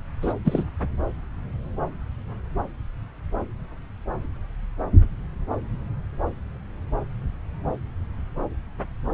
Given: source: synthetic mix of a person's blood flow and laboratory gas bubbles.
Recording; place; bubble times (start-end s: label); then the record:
Doppler ultrasound of blood flow; subclavian vein
0.22-0.34 s: bubbles
0.45-0.64 s: bubbles
From the record:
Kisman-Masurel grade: 212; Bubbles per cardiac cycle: several, 3 to 8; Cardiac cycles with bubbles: 1 to 10%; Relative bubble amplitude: moderate (0.250 to 0.450); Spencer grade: 1 (occasional bubble signal discernible with the cardiac motion signal, with majority of cardiac periods free of bubbles); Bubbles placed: anywhere in the cardiac cycle